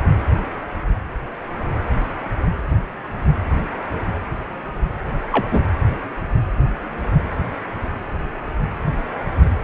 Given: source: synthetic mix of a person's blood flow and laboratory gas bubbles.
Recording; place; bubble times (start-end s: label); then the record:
Doppler ultrasound of blood flow; precordium
5.32-5.47 s: bubbles
5.51-5.65 s: bubbles
From the record:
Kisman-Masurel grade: 122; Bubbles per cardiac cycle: 1 to 2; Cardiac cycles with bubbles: 10 to 50%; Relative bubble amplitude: moderate (0.250 to 0.450); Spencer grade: 2 (many but less than half of the cardiac periods contain bubble signals, singularly or in groups); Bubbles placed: anywhere in the cardiac cycle